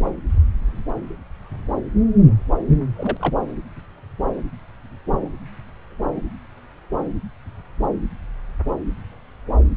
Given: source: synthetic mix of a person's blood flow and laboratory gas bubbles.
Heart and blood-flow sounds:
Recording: Doppler ultrasound of blood flow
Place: subclavian vein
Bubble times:
2.96-3.33 s: bubbles
From the record:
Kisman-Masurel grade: 212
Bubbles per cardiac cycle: several, 3 to 8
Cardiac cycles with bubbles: 1 to 10%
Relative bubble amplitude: moderate (0.250 to 0.450)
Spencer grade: 1 (occasional bubble signal discernible with the cardiac motion signal, with majority of cardiac periods free of bubbles)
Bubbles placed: anywhere in the cardiac cycle

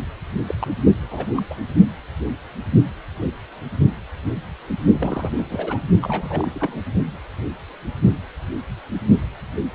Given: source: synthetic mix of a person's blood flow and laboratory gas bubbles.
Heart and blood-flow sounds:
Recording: Doppler ultrasound of blood flow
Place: precordium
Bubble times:
0.46-0.55 s: bubbles
0.59-0.73 s: bubbles
1.10-1.42 s: bubbles
1.50-1.55 s: bubbles
4.90-5.31 s: bubbles
5.37-5.82 s: bubbles
6.01-6.83 s: bubbles
From the record:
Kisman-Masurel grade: 221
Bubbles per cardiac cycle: several, 3 to 8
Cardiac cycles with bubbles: 10 to 50%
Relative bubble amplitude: barely perceptible (0.100 to 0.250)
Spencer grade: 2 (many but less than half of the cardiac periods contain bubble signals, singularly or in groups)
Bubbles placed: only in the low amplitude regions of the cardiac cycle

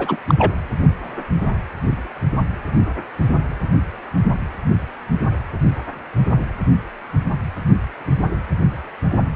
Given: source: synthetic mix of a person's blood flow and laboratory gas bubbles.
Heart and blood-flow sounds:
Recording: Doppler ultrasound of blood flow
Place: precordium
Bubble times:
0.00-0.16 s: bubbles
0.27-0.35 s: bubbles
0.38-0.52 s: bubbles
From the record:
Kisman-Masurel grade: 213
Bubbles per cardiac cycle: several, 3 to 8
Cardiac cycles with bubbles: 1 to 10%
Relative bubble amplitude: loud (0.450 to 0.775)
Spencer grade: 1 (occasional bubble signal discernible with the cardiac motion signal, with majority of cardiac periods free of bubbles)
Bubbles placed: anywhere in the cardiac cycle

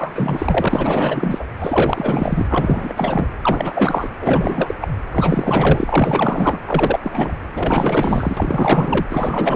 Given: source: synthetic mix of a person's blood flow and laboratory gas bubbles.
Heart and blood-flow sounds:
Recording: Doppler ultrasound of blood flow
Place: precordium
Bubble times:
0.00-1.44 s: bubbles
1.60-2.46 s: bubbles
2.50-3.28 s: bubbles
3.42-4.08 s: bubbles
4.21-4.75 s: bubbles
4.81-4.88 s: bubbles
5.12-6.60 s: bubbles
6.66-6.99 s: bubbles
7.03-7.36 s: bubbles
7.56-9.06 s: bubbles
9.10-9.56 s: bubbles
From the record:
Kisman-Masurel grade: 444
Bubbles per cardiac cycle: continuous sound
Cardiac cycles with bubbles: 100%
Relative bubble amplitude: maximal (0.775 to 0.999)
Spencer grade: 4 (maximum detectable bubble signal sounding continuously throughout systole and diastole of every cardiac period, and overriding the amplitude of the normal cardiac signals)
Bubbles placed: anywhere in the cardiac cycle

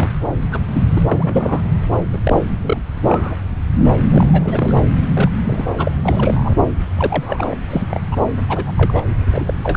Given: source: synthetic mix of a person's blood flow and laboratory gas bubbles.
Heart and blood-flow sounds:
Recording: Doppler ultrasound of blood flow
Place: subclavian vein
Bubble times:
0.00-0.10 s: bubbles
0.51-0.60 s: bubbles
0.73-0.81 s: bubbles
0.95-1.02 s: bubbles
1.11-1.60 s: bubbles
2.12-2.19 s: bubbles
2.23-2.33 s: bubbles
2.48-2.83 s: bubbles
3.02-3.35 s: bubbles
4.09-4.80 s: bubbles
5.13-5.31 s: bubbles
5.43-5.65 s: bubbles
5.78-5.92 s: bubbles
6.03-6.55 s: bubbles
6.97-7.54 s: bubbles
7.69-7.86 s: bubbles
7.91-8.00 s: bubbles
8.11-8.17 s: bubbles
8.49-8.71 s: bubbles
8.77-9.05 s: bubbles
9.32-9.54 s: bubbles
9.63-9.77 s: bubbles
From the record:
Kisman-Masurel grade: 242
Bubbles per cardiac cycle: several, 3 to 8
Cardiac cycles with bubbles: 100%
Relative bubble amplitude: moderate (0.250 to 0.450)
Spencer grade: 3 (all of the cardiac periods contain showers or single bubble signals, but not dominating or overriding the cardiac motion signals)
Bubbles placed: anywhere in the cardiac cycle

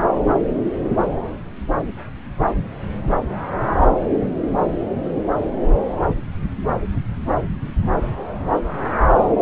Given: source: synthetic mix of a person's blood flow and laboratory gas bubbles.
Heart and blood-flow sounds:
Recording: Doppler ultrasound of blood flow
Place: subclavian vein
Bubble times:
no bubbles
From the record:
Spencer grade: 0 (complete lack of bubble signals)

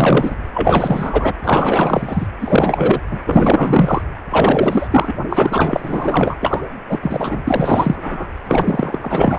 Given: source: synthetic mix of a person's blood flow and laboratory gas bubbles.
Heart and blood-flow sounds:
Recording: Doppler ultrasound of blood flow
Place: precordium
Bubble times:
0.00-0.35 s: bubbles
0.53-1.34 s: bubbles
1.44-2.27 s: bubbles
2.40-3.00 s: bubbles
3.10-3.20 s: bubbles
3.26-4.02 s: bubbles
4.30-4.87 s: bubbles
4.90-5.14 s: bubbles
5.29-6.36 s: bubbles
6.40-6.61 s: bubbles
6.89-6.99 s: bubbles
7.02-7.43 s: bubbles
7.47-7.95 s: bubbles
8.03-8.33 s: bubbles
8.44-9.38 s: bubbles
From the record:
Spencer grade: 4 (maximum detectable bubble signal sounding continuously throughout systole and diastole of every cardiac period, and overriding the amplitude of the normal cardiac signals)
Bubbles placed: anywhere in the cardiac cycle

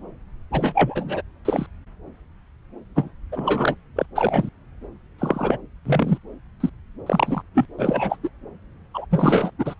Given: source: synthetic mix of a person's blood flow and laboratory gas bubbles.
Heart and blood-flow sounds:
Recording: Doppler ultrasound of blood flow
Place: subclavian vein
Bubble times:
0.52-1.22 s: bubbles
1.45-1.67 s: bubbles
2.96-3.10 s: bubbles
3.32-3.75 s: bubbles
3.96-4.05 s: bubbles
4.15-4.49 s: bubbles
5.19-5.58 s: bubbles
5.85-6.17 s: bubbles
6.60-6.70 s: bubbles
7.06-7.42 s: bubbles
7.54-7.66 s: bubbles
7.79-8.17 s: bubbles
8.23-8.29 s: bubbles
8.94-9.05 s: bubbles
9.11-9.51 s: bubbles
9.59-9.74 s: bubbles
From the record:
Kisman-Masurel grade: 232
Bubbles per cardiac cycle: several, 3 to 8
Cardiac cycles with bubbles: 50 to 99%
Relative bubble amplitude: moderate (0.250 to 0.450)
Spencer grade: 3 (all of the cardiac periods contain showers or single bubble signals, but not dominating or overriding the cardiac motion signals)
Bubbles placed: anywhere in the cardiac cycle

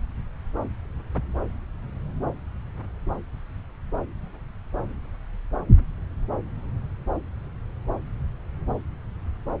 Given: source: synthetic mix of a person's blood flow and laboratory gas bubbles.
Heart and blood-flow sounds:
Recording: Doppler ultrasound of blood flow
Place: subclavian vein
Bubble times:
no bubbles
From the record:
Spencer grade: 0 (complete lack of bubble signals)

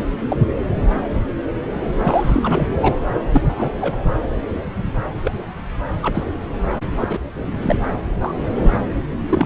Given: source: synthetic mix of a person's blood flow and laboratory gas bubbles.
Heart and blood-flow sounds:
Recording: Doppler ultrasound of blood flow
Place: subclavian vein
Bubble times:
0.00-0.05 s: bubbles
0.28-0.41 s: bubbles
0.67-0.87 s: bubbles
1.99-2.67 s: bubbles
2.81-2.95 s: bubbles
3.08-3.23 s: bubbles
3.33-3.42 s: bubbles
3.48-3.72 s: bubbles
3.81-3.97 s: bubbles
5.24-5.32 s: bubbles
6.01-6.24 s: bubbles
6.99-7.20 s: bubbles
7.62-7.75 s: bubbles
8.21-8.32 s: bubbles
8.55-8.71 s: bubbles
9.29-9.46 s: bubbles
From the record:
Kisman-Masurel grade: 232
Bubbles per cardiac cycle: several, 3 to 8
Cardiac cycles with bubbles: 50 to 99%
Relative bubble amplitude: moderate (0.250 to 0.450)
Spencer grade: 3 (all of the cardiac periods contain showers or single bubble signals, but not dominating or overriding the cardiac motion signals)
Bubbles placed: anywhere in the cardiac cycle

